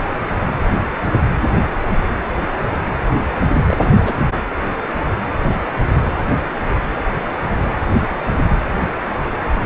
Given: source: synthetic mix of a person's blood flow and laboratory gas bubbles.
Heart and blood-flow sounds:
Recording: Doppler ultrasound of blood flow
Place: precordium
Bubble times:
3.68-3.90 s: bubbles
3.98-4.14 s: bubbles
From the record:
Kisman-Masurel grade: 112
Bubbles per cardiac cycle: 1 to 2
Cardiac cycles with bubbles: 1 to 10%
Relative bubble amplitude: moderate (0.250 to 0.450)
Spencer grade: 1 (occasional bubble signal discernible with the cardiac motion signal, with majority of cardiac periods free of bubbles)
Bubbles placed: anywhere in the cardiac cycle

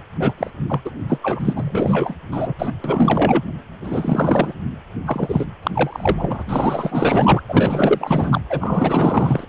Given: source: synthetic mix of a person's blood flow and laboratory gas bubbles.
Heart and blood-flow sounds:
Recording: Doppler ultrasound of blood flow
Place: precordium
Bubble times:
0.19-0.33 s: bubbles
0.37-0.51 s: bubbles
0.68-0.80 s: bubbles
0.85-0.91 s: bubbles
1.08-1.18 s: bubbles
1.22-2.15 s: bubbles
2.32-2.54 s: bubbles
2.58-2.72 s: bubbles
2.84-3.43 s: bubbles
3.83-4.55 s: bubbles
5.06-5.46 s: bubbles
5.63-5.71 s: bubbles
5.75-6.42 s: bubbles
6.46-7.42 s: bubbles
7.49-8.41 s: bubbles
8.49-9.46 s: bubbles
From the record:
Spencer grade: 4 (maximum detectable bubble signal sounding continuously throughout systole and diastole of every cardiac period, and overriding the amplitude of the normal cardiac signals)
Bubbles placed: anywhere in the cardiac cycle

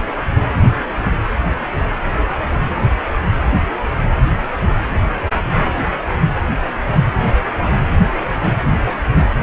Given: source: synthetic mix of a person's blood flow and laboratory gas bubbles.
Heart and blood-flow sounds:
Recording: Doppler ultrasound of blood flow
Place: precordium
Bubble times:
0.94-1.08 s: bubbles
1.41-1.45 s: bubbles
2.39-2.46 s: bubbles
2.65-2.70 s: bubbles
4.59-4.73 s: bubbles
From the record:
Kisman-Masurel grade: 121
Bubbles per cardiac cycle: 1 to 2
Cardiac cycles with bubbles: 10 to 50%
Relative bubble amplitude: barely perceptible (0.100 to 0.250)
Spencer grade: 2 (many but less than half of the cardiac periods contain bubble signals, singularly or in groups)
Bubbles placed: only in the low amplitude regions of the cardiac cycle

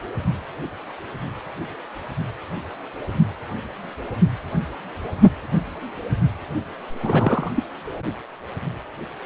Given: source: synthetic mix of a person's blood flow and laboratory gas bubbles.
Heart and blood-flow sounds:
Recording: Doppler ultrasound of blood flow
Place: precordium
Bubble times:
7.02-7.50 s: bubbles
7.55-7.63 s: bubbles
From the record:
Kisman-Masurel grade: 212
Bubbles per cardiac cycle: several, 3 to 8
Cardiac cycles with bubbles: 1 to 10%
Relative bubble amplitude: moderate (0.250 to 0.450)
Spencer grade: 1 (occasional bubble signal discernible with the cardiac motion signal, with majority of cardiac periods free of bubbles)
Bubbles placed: anywhere in the cardiac cycle

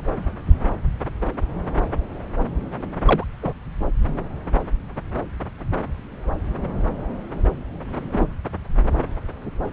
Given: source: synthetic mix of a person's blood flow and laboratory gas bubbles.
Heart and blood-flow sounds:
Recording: Doppler ultrasound of blood flow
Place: subclavian vein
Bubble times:
3.05-3.24 s: bubbles
3.42-3.52 s: bubbles
7.86-8.35 s: bubbles
From the record:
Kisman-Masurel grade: 123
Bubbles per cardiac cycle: 1 to 2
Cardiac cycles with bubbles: 10 to 50%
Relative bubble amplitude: loud (0.450 to 0.775)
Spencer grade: 2 (many but less than half of the cardiac periods contain bubble signals, singularly or in groups)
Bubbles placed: anywhere in the cardiac cycle

